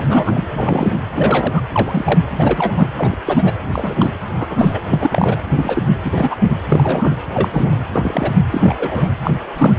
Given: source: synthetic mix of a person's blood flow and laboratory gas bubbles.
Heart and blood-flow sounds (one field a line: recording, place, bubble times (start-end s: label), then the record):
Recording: Doppler ultrasound of blood flow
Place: precordium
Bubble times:
0.00-0.47 s: bubbles
0.53-0.91 s: bubbles
1.15-1.61 s: bubbles
1.72-2.19 s: bubbles
2.38-2.73 s: bubbles
2.76-2.88 s: bubbles
2.97-3.15 s: bubbles
3.25-3.53 s: bubbles
3.71-4.10 s: bubbles
4.37-4.81 s: bubbles
4.90-5.37 s: bubbles
5.56-5.83 s: bubbles
6.05-6.36 s: bubbles
6.68-7.18 s: bubbles
7.34-7.71 s: bubbles
7.92-8.31 s: bubbles
8.51-8.75 s: bubbles
8.79-9.09 s: bubbles
9.23-9.34 s: bubbles
9.56-9.74 s: bubbles
From the record:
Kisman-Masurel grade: 242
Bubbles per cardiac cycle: several, 3 to 8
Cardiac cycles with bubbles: 100%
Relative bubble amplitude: moderate (0.250 to 0.450)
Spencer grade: 3 (all of the cardiac periods contain showers or single bubble signals, but not dominating or overriding the cardiac motion signals)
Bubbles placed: anywhere in the cardiac cycle